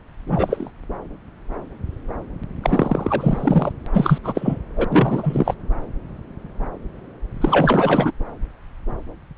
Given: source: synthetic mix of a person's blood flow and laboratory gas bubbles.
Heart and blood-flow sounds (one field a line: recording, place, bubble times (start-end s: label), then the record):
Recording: Doppler ultrasound of blood flow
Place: subclavian vein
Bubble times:
0.26-0.71 s: bubbles
2.63-3.72 s: bubbles
3.93-4.18 s: bubbles
4.24-4.59 s: bubbles
4.76-4.84 s: bubbles
4.91-5.54 s: bubbles
7.41-8.11 s: bubbles
From the record:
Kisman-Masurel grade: 333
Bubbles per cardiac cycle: rolling drumbeat, 9 or more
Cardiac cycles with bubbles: 50 to 99%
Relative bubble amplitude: loud (0.450 to 0.775)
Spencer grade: 3 (all of the cardiac periods contain showers or single bubble signals, but not dominating or overriding the cardiac motion signals)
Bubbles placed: anywhere in the cardiac cycle